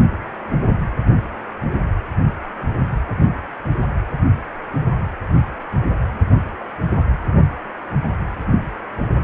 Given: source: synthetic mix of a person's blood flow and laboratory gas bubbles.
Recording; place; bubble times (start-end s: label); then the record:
Doppler ultrasound of blood flow; precordium
no bubbles
From the record:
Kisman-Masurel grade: 000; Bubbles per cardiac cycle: 0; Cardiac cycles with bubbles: 0%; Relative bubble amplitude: no bubbles discernible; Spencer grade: 0 (complete lack of bubble signals)